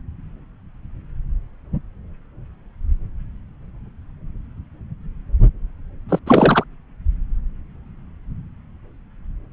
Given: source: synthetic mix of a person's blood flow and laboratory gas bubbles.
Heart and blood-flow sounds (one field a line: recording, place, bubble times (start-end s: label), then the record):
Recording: Doppler ultrasound of blood flow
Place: subclavian vein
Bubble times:
6.08-6.19 s: bubbles
6.26-6.64 s: bubbles
From the record:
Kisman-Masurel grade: 213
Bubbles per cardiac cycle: several, 3 to 8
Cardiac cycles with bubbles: 1 to 10%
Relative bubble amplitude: loud (0.450 to 0.775)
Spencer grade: 1 (occasional bubble signal discernible with the cardiac motion signal, with majority of cardiac periods free of bubbles)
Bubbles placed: anywhere in the cardiac cycle